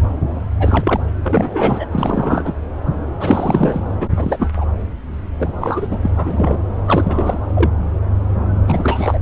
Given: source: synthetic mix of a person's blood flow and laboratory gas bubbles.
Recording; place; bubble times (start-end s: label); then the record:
Doppler ultrasound of blood flow; subclavian vein
0.59-1.00 s: bubbles
1.23-1.85 s: bubbles
1.91-2.53 s: bubbles
3.20-3.84 s: bubbles
4.00-4.08 s: bubbles
4.17-4.49 s: bubbles
4.57-4.66 s: bubbles
5.38-5.87 s: bubbles
5.91-5.99 s: bubbles
6.02-6.11 s: bubbles
6.16-6.58 s: bubbles
6.86-7.40 s: bubbles
7.54-7.71 s: bubbles
8.67-9.19 s: bubbles
From the record:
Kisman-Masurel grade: 332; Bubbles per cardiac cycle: rolling drumbeat, 9 or more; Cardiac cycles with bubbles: 50 to 99%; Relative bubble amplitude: moderate (0.250 to 0.450); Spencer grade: 3 (all of the cardiac periods contain showers or single bubble signals, but not dominating or overriding the cardiac motion signals); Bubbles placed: anywhere in the cardiac cycle